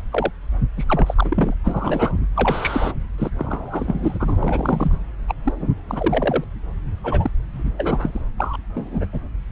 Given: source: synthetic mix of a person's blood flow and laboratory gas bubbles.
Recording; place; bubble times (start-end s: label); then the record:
Doppler ultrasound of blood flow; subclavian vein
0.00-0.02 s: bubbles
0.11-0.30 s: bubbles
0.77-0.84 s: bubbles
0.88-1.54 s: bubbles
1.63-2.16 s: bubbles
2.34-2.94 s: bubbles
3.18-3.30 s: bubbles
3.38-4.98 s: bubbles
5.27-5.34 s: bubbles
5.44-5.54 s: bubbles
5.59-5.68 s: bubbles
5.88-6.44 s: bubbles
7.04-7.30 s: bubbles
7.53-7.71 s: bubbles
7.77-8.22 s: bubbles
8.38-8.57 s: bubbles
8.75-9.07 s: bubbles
9.12-9.21 s: bubbles
From the record:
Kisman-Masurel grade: 232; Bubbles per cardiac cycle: several, 3 to 8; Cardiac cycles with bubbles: 50 to 99%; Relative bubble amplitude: moderate (0.250 to 0.450); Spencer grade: 3 (all of the cardiac periods contain showers or single bubble signals, but not dominating or overriding the cardiac motion signals); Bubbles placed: anywhere in the cardiac cycle